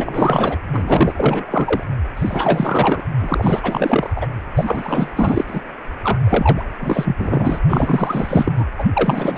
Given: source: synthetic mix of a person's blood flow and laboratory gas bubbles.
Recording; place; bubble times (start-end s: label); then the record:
Doppler ultrasound of blood flow; precordium
0.00-0.56 s: bubbles
0.73-1.84 s: bubbles
2.17-3.03 s: bubbles
3.20-4.27 s: bubbles
4.56-5.11 s: bubbles
5.16-5.44 s: bubbles
5.47-5.61 s: bubbles
6.03-6.19 s: bubbles
6.24-6.63 s: bubbles
6.79-7.58 s: bubbles
7.68-8.53 s: bubbles
8.57-8.66 s: bubbles
8.79-8.85 s: bubbles
8.93-9.38 s: bubbles
From the record:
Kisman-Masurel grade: 444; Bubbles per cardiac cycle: continuous sound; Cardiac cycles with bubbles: 100%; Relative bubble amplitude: maximal (0.775 to 0.999); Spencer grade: 4 (maximum detectable bubble signal sounding continuously throughout systole and diastole of every cardiac period, and overriding the amplitude of the normal cardiac signals); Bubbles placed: anywhere in the cardiac cycle